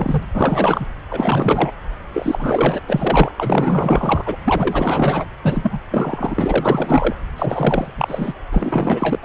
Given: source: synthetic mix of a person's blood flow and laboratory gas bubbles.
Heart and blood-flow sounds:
Doppler ultrasound of blood flow; subclavian vein
0.00-0.23 s: bubbles
0.34-0.87 s: bubbles
1.10-1.71 s: bubbles
2.14-2.81 s: bubbles
2.88-3.31 s: bubbles
3.37-4.36 s: bubbles
4.44-5.25 s: bubbles
5.42-5.80 s: bubbles
5.91-7.15 s: bubbles
7.36-7.94 s: bubbles
7.97-8.33 s: bubbles
8.52-9.19 s: bubbles
9.23-9.25 s: bubbles
From the record:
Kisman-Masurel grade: 444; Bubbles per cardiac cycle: continuous sound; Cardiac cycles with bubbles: 100%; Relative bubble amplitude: maximal (0.775 to 0.999); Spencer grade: 4 (maximum detectable bubble signal sounding continuously throughout systole and diastole of every cardiac period, and overriding the amplitude of the normal cardiac signals); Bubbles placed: anywhere in the cardiac cycle

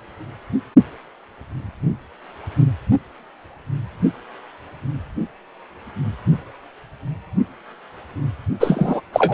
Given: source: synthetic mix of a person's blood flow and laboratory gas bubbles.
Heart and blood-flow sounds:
Doppler ultrasound of blood flow; precordium
8.60-9.01 s: bubbles
9.12-9.34 s: bubbles
From the record:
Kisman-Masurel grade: 213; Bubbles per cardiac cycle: several, 3 to 8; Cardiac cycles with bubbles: 1 to 10%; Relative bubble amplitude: loud (0.450 to 0.775); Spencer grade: 1 (occasional bubble signal discernible with the cardiac motion signal, with majority of cardiac periods free of bubbles); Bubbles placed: only in the low amplitude regions of the cardiac cycle

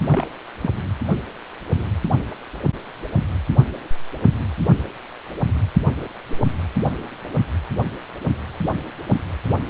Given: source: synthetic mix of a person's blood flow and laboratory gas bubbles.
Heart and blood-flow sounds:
Doppler ultrasound of blood flow; precordium
0.08-0.28 s: bubbles
0.61-0.70 s: bubbles
From the record:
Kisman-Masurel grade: 111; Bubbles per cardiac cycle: 1 to 2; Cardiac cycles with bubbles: 1 to 10%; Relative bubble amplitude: barely perceptible (0.100 to 0.250); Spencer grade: 1 (occasional bubble signal discernible with the cardiac motion signal, with majority of cardiac periods free of bubbles); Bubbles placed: anywhere in the cardiac cycle

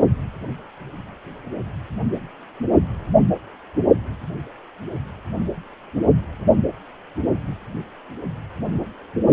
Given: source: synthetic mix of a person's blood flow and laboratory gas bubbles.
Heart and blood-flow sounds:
Doppler ultrasound of blood flow; precordium
no bubbles
From the record:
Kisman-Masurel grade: 000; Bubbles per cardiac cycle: 0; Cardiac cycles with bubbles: 0%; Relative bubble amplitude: no bubbles discernible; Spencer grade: 0 (complete lack of bubble signals)

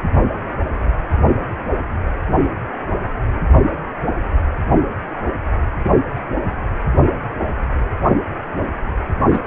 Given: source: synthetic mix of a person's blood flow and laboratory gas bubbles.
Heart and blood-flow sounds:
Doppler ultrasound of blood flow; precordium
9.31-9.40 s: bubbles
From the record:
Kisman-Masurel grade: 212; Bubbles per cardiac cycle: several, 3 to 8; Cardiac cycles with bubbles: 1 to 10%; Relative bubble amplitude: moderate (0.250 to 0.450); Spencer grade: 1 (occasional bubble signal discernible with the cardiac motion signal, with majority of cardiac periods free of bubbles); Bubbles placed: only in the low amplitude regions of the cardiac cycle

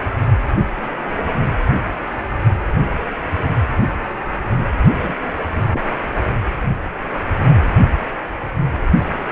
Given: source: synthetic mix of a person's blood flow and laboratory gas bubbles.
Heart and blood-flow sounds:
Doppler ultrasound of blood flow; precordium
5.02-5.15 s: bubbles
5.72-5.82 s: bubbles
From the record:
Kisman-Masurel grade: 112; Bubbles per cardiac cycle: 1 to 2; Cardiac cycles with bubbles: 1 to 10%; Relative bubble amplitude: moderate (0.250 to 0.450); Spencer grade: 1 (occasional bubble signal discernible with the cardiac motion signal, with majority of cardiac periods free of bubbles); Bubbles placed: only in the low amplitude regions of the cardiac cycle

